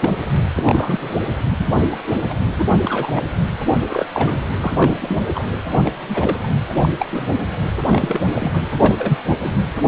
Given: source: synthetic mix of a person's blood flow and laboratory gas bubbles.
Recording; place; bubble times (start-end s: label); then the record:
Doppler ultrasound of blood flow; precordium
0.00-0.20 s: bubbles
0.56-1.20 s: bubbles
1.58-1.68 s: bubbles
1.92-1.96 s: bubbles
2.29-2.34 s: bubbles
2.55-2.64 s: bubbles
2.72-2.77 s: bubbles
2.81-3.23 s: bubbles
3.90-4.06 s: bubbles
4.12-4.42 s: bubbles
4.61-4.89 s: bubbles
5.00-5.20 s: bubbles
5.35-5.43 s: bubbles
5.84-5.92 s: bubbles
6.08-6.54 s: bubbles
6.82-6.89 s: bubbles
6.99-7.06 s: bubbles
7.12-7.36 s: bubbles
7.90-8.68 s: bubbles
8.78-8.96 s: bubbles
8.98-9.21 s: bubbles
9.26-9.38 s: bubbles
9.40-9.54 s: bubbles
From the record:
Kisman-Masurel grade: 242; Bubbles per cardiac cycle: several, 3 to 8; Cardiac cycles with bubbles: 100%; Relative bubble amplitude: moderate (0.250 to 0.450); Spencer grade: 3 (all of the cardiac periods contain showers or single bubble signals, but not dominating or overriding the cardiac motion signals); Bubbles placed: anywhere in the cardiac cycle